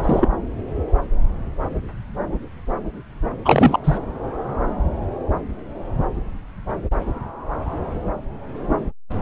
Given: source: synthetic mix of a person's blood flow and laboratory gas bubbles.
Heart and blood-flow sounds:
Doppler ultrasound of blood flow; subclavian vein
0.00-0.28 s: bubbles
3.44-3.78 s: bubbles
3.84-3.98 s: bubbles
From the record:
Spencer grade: 1 (occasional bubble signal discernible with the cardiac motion signal, with majority of cardiac periods free of bubbles); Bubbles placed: anywhere in the cardiac cycle

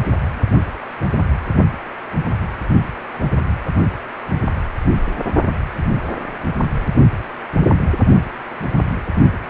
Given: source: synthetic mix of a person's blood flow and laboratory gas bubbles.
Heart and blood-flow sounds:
Doppler ultrasound of blood flow; precordium
3.14-3.19 s: bubbles
From the record:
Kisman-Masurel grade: 111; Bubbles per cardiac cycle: 1 to 2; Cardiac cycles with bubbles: 1 to 10%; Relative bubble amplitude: barely perceptible (0.100 to 0.250); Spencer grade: 1 (occasional bubble signal discernible with the cardiac motion signal, with majority of cardiac periods free of bubbles); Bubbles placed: only in the low amplitude regions of the cardiac cycle

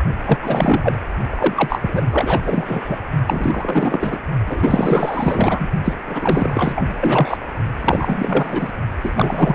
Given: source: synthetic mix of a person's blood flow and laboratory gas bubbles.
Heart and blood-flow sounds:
Doppler ultrasound of blood flow; precordium
0.25-0.37 s: bubbles
0.42-0.96 s: bubbles
1.29-3.00 s: bubbles
3.27-4.19 s: bubbles
4.46-5.68 s: bubbles
5.83-5.96 s: bubbles
6.06-7.38 s: bubbles
7.81-8.72 s: bubbles
9.02-9.55 s: bubbles
From the record:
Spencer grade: 4 (maximum detectable bubble signal sounding continuously throughout systole and diastole of every cardiac period, and overriding the amplitude of the normal cardiac signals); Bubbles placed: only in the low amplitude regions of the cardiac cycle

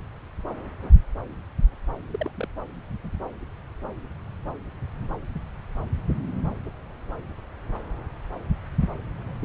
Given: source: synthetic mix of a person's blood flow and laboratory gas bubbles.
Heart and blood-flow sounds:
Doppler ultrasound of blood flow; subclavian vein
2.10-2.31 s: bubbles
2.34-2.48 s: bubbles
From the record:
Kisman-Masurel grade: 111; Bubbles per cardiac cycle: 1 to 2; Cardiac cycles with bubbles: 1 to 10%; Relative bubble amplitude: barely perceptible (0.100 to 0.250); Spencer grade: 1 (occasional bubble signal discernible with the cardiac motion signal, with majority of cardiac periods free of bubbles); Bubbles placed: anywhere in the cardiac cycle

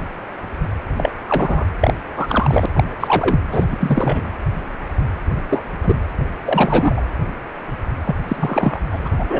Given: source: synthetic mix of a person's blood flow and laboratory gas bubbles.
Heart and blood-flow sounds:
Doppler ultrasound of blood flow; precordium
0.96-1.12 s: bubbles
1.27-1.65 s: bubbles
1.80-1.94 s: bubbles
2.17-2.66 s: bubbles
2.76-2.83 s: bubbles
3.00-3.39 s: bubbles
3.51-3.66 s: bubbles
3.71-3.76 s: bubbles
3.80-4.30 s: bubbles
5.49-5.64 s: bubbles
5.83-6.00 s: bubbles
6.44-7.01 s: bubbles
8.06-8.15 s: bubbles
8.28-8.79 s: bubbles
8.92-9.09 s: bubbles
9.19-9.25 s: bubbles
9.30-9.40 s: bubbles
From the record:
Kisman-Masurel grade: 233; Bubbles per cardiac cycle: several, 3 to 8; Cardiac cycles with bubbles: 50 to 99%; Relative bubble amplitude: loud (0.450 to 0.775); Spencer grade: 3 (all of the cardiac periods contain showers or single bubble signals, but not dominating or overriding the cardiac motion signals); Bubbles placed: anywhere in the cardiac cycle

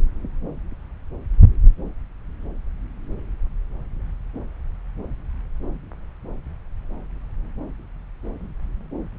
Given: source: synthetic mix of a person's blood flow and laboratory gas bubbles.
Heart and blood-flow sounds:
Doppler ultrasound of blood flow; subclavian vein
no bubbles
From the record:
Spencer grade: 0 (complete lack of bubble signals)

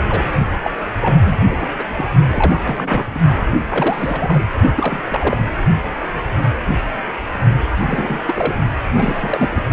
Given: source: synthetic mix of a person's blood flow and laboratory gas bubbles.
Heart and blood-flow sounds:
Doppler ultrasound of blood flow; precordium
0.00-0.02 s: bubbles
0.08-0.24 s: bubbles
0.49-0.56 s: bubbles
0.64-0.70 s: bubbles
1.00-1.36 s: bubbles
1.41-1.72 s: bubbles
1.78-1.85 s: bubbles
1.89-2.05 s: bubbles
2.30-2.59 s: bubbles
2.63-3.19 s: bubbles
3.69-4.43 s: bubbles
4.75-5.03 s: bubbles
5.09-5.46 s: bubbles
7.81-8.21 s: bubbles
8.27-8.56 s: bubbles
8.93-9.63 s: bubbles
From the record:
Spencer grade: 3 (all of the cardiac periods contain showers or single bubble signals, but not dominating or overriding the cardiac motion signals); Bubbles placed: only in the low amplitude regions of the cardiac cycle

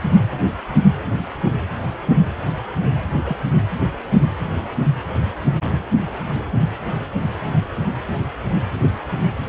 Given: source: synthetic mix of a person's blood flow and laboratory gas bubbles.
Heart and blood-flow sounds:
Doppler ultrasound of blood flow; precordium
3.24-3.36 s: bubbles
From the record:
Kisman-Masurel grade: 112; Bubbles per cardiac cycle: 1 to 2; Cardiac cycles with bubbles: 1 to 10%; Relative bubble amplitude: moderate (0.250 to 0.450); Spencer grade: 1 (occasional bubble signal discernible with the cardiac motion signal, with majority of cardiac periods free of bubbles); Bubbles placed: anywhere in the cardiac cycle

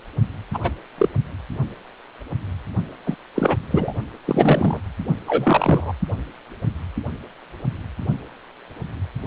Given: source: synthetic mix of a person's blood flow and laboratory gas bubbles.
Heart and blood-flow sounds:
Doppler ultrasound of blood flow; precordium
0.53-0.59 s: bubbles
0.63-0.70 s: bubbles
0.97-1.08 s: bubbles
3.06-3.17 s: bubbles
3.35-3.56 s: bubbles
3.70-3.94 s: bubbles
4.25-4.79 s: bubbles
5.27-5.93 s: bubbles
From the record:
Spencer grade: 3 (all of the cardiac periods contain showers or single bubble signals, but not dominating or overriding the cardiac motion signals); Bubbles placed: only in the low amplitude regions of the cardiac cycle

